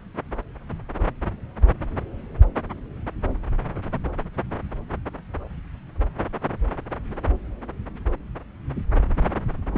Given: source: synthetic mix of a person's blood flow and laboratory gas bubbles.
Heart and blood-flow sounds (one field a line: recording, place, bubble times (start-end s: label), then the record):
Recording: Doppler ultrasound of blood flow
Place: subclavian vein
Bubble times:
9.73-9.78 s: bubbles
From the record:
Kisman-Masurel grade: 111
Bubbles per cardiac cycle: 1 to 2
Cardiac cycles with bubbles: 1 to 10%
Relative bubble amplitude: barely perceptible (0.100 to 0.250)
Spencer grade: 1 (occasional bubble signal discernible with the cardiac motion signal, with majority of cardiac periods free of bubbles)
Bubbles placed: anywhere in the cardiac cycle